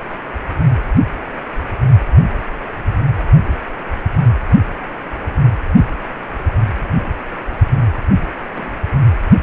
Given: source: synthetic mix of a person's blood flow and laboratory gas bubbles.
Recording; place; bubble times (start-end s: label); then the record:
Doppler ultrasound of blood flow; precordium
8.54-8.73 s: bubbles
From the record:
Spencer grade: 1 (occasional bubble signal discernible with the cardiac motion signal, with majority of cardiac periods free of bubbles); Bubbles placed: anywhere in the cardiac cycle